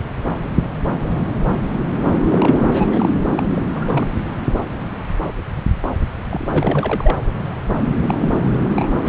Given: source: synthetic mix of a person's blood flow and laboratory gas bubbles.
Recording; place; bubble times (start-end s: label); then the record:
Doppler ultrasound of blood flow; subclavian vein
2.28-2.67 s: bubbles
2.70-3.09 s: bubbles
3.36-3.43 s: bubbles
3.55-3.62 s: bubbles
3.72-4.10 s: bubbles
6.30-7.16 s: bubbles
8.07-8.37 s: bubbles
8.74-9.09 s: bubbles
From the record:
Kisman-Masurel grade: 222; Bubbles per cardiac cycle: several, 3 to 8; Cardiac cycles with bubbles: 10 to 50%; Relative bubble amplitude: moderate (0.250 to 0.450); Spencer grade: 2 (many but less than half of the cardiac periods contain bubble signals, singularly or in groups); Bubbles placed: anywhere in the cardiac cycle